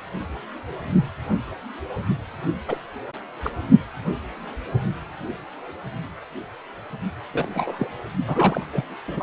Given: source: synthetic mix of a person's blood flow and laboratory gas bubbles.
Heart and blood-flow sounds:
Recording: Doppler ultrasound of blood flow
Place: precordium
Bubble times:
2.67-2.77 s: bubbles
3.42-3.50 s: bubbles
7.34-7.87 s: bubbles
8.27-8.66 s: bubbles
8.72-8.84 s: bubbles
9.07-9.22 s: bubbles
From the record:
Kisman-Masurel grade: 221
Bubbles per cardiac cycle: several, 3 to 8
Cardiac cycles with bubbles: 10 to 50%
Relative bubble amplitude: barely perceptible (0.100 to 0.250)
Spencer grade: 2 (many but less than half of the cardiac periods contain bubble signals, singularly or in groups)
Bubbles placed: only in the low amplitude regions of the cardiac cycle

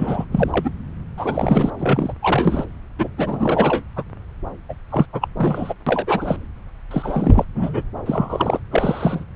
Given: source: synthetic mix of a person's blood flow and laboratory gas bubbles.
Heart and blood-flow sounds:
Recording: Doppler ultrasound of blood flow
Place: subclavian vein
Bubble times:
0.00-0.25 s: bubbles
0.31-0.70 s: bubbles
1.17-1.71 s: bubbles
1.79-2.12 s: bubbles
2.22-2.65 s: bubbles
2.98-3.08 s: bubbles
3.17-3.83 s: bubbles
3.96-4.04 s: bubbles
4.69-4.74 s: bubbles
4.90-5.06 s: bubbles
5.13-5.28 s: bubbles
5.37-5.74 s: bubbles
5.87-6.36 s: bubbles
6.91-7.45 s: bubbles
7.55-7.83 s: bubbles
8.05-8.60 s: bubbles
8.71-9.24 s: bubbles
From the record:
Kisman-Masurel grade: 342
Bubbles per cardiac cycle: rolling drumbeat, 9 or more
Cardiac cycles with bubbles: 100%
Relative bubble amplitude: moderate (0.250 to 0.450)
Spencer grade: 3 (all of the cardiac periods contain showers or single bubble signals, but not dominating or overriding the cardiac motion signals)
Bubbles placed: anywhere in the cardiac cycle

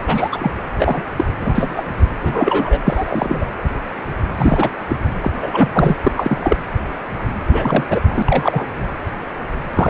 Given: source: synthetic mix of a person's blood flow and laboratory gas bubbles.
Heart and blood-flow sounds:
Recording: Doppler ultrasound of blood flow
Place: precordium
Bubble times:
0.07-0.29 s: bubbles
0.32-0.51 s: bubbles
0.78-1.03 s: bubbles
1.17-1.24 s: bubbles
1.41-1.83 s: bubbles
2.19-2.81 s: bubbles
2.85-3.47 s: bubbles
4.37-4.69 s: bubbles
4.89-4.96 s: bubbles
5.21-5.30 s: bubbles
5.42-5.69 s: bubbles
5.73-5.96 s: bubbles
6.03-6.11 s: bubbles
6.15-6.56 s: bubbles
7.48-7.84 s: bubbles
7.90-8.00 s: bubbles
8.04-8.22 s: bubbles
8.26-8.66 s: bubbles
9.73-9.90 s: bubbles
From the record:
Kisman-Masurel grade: 233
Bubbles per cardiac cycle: several, 3 to 8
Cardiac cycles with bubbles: 50 to 99%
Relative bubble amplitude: loud (0.450 to 0.775)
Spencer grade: 3 (all of the cardiac periods contain showers or single bubble signals, but not dominating or overriding the cardiac motion signals)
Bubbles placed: anywhere in the cardiac cycle

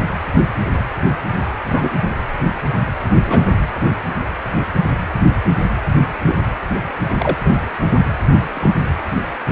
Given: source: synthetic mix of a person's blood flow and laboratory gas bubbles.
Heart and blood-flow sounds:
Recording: Doppler ultrasound of blood flow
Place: precordium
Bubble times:
1.65-1.94 s: bubbles
3.27-3.46 s: bubbles
6.26-6.37 s: bubbles
7.18-7.37 s: bubbles
7.44-7.54 s: bubbles
8.54-8.70 s: bubbles
From the record:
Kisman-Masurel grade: 122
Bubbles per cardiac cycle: 1 to 2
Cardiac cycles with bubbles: 10 to 50%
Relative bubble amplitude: moderate (0.250 to 0.450)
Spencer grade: 2 (many but less than half of the cardiac periods contain bubble signals, singularly or in groups)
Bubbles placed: anywhere in the cardiac cycle

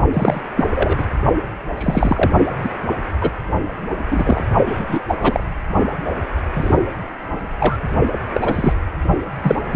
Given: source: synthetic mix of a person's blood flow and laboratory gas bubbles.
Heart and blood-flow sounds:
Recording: Doppler ultrasound of blood flow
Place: precordium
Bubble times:
0.13-0.41 s: bubbles
0.56-0.66 s: bubbles
0.69-1.05 s: bubbles
1.77-2.33 s: bubbles
2.63-2.70 s: bubbles
3.21-3.30 s: bubbles
4.10-4.44 s: bubbles
4.66-5.00 s: bubbles
5.08-5.44 s: bubbles
6.54-6.78 s: bubbles
7.59-7.78 s: bubbles
8.34-8.73 s: bubbles
9.42-9.55 s: bubbles
9.72-9.76 s: bubbles
From the record:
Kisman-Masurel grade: 243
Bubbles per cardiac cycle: several, 3 to 8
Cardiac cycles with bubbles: 100%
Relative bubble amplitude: loud (0.450 to 0.775)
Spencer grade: 3 (all of the cardiac periods contain showers or single bubble signals, but not dominating or overriding the cardiac motion signals)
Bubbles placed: only in the low amplitude regions of the cardiac cycle

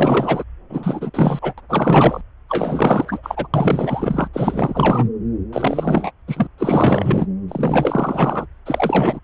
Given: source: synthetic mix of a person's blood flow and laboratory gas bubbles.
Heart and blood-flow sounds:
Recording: Doppler ultrasound of blood flow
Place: subclavian vein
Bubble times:
0.00-0.44 s: bubbles
0.69-1.10 s: bubbles
1.14-1.39 s: bubbles
1.42-1.54 s: bubbles
1.58-1.61 s: bubbles
1.69-2.21 s: bubbles
2.49-3.48 s: bubbles
3.53-4.28 s: bubbles
4.33-5.09 s: bubbles
5.53-6.11 s: bubbles
6.28-6.47 s: bubbles
6.58-7.26 s: bubbles
7.48-8.46 s: bubbles
8.66-9.20 s: bubbles
From the record:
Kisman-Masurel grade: 444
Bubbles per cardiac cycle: continuous sound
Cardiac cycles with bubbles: 100%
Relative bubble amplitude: maximal (0.775 to 0.999)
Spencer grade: 4 (maximum detectable bubble signal sounding continuously throughout systole and diastole of every cardiac period, and overriding the amplitude of the normal cardiac signals)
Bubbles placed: anywhere in the cardiac cycle

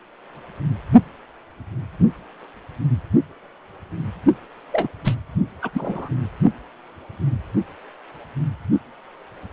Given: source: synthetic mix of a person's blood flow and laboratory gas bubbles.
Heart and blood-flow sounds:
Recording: Doppler ultrasound of blood flow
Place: precordium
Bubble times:
4.72-4.88 s: bubbles
5.04-5.15 s: bubbles
5.62-5.71 s: bubbles
5.73-6.10 s: bubbles
From the record:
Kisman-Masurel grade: 212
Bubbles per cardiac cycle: several, 3 to 8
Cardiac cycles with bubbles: 1 to 10%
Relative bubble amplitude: moderate (0.250 to 0.450)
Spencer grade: 1 (occasional bubble signal discernible with the cardiac motion signal, with majority of cardiac periods free of bubbles)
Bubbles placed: only in the low amplitude regions of the cardiac cycle

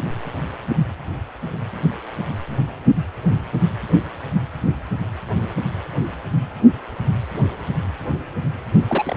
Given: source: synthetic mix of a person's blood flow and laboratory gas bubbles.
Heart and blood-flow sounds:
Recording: Doppler ultrasound of blood flow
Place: precordium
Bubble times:
8.88-9.17 s: bubbles
From the record:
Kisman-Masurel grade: 212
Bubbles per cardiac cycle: several, 3 to 8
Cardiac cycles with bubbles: 1 to 10%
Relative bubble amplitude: moderate (0.250 to 0.450)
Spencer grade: 1 (occasional bubble signal discernible with the cardiac motion signal, with majority of cardiac periods free of bubbles)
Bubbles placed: anywhere in the cardiac cycle

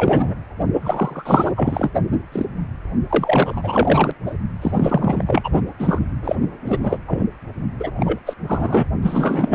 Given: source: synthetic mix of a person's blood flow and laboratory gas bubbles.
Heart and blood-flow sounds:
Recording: Doppler ultrasound of blood flow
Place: precordium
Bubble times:
0.00-0.34 s: bubbles
0.81-1.53 s: bubbles
1.55-1.91 s: bubbles
2.32-2.45 s: bubbles
3.09-4.12 s: bubbles
4.26-4.35 s: bubbles
4.62-4.71 s: bubbles
4.74-5.24 s: bubbles
5.27-5.62 s: bubbles
5.79-6.00 s: bubbles
6.24-6.36 s: bubbles
6.65-6.79 s: bubbles
6.83-6.97 s: bubbles
7.08-7.25 s: bubbles
7.79-7.92 s: bubbles
7.96-8.20 s: bubbles
8.26-8.34 s: bubbles
8.47-8.86 s: bubbles
9.02-9.54 s: bubbles
From the record:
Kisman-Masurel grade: 343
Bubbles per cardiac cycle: rolling drumbeat, 9 or more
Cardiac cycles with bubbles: 100%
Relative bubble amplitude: loud (0.450 to 0.775)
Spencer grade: 3 (all of the cardiac periods contain showers or single bubble signals, but not dominating or overriding the cardiac motion signals)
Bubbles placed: anywhere in the cardiac cycle

